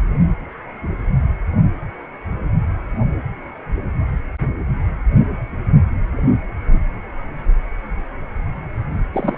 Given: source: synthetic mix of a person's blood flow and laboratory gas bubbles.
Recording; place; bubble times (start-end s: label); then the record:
Doppler ultrasound of blood flow; precordium
9.13-9.38 s: bubbles
From the record:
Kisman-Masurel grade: 223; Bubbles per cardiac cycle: several, 3 to 8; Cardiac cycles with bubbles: 10 to 50%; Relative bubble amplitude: loud (0.450 to 0.775); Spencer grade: 2 (many but less than half of the cardiac periods contain bubble signals, singularly or in groups); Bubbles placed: only in the low amplitude regions of the cardiac cycle